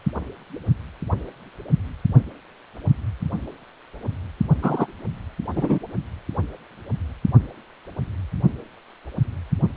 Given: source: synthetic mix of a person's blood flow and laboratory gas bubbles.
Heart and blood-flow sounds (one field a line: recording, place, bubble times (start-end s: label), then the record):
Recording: Doppler ultrasound of blood flow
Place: precordium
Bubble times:
4.62-4.87 s: bubbles
5.55-5.79 s: bubbles
From the record:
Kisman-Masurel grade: 113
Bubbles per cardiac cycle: 1 to 2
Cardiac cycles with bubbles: 1 to 10%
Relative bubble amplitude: loud (0.450 to 0.775)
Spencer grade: 1 (occasional bubble signal discernible with the cardiac motion signal, with majority of cardiac periods free of bubbles)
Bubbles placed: only in the low amplitude regions of the cardiac cycle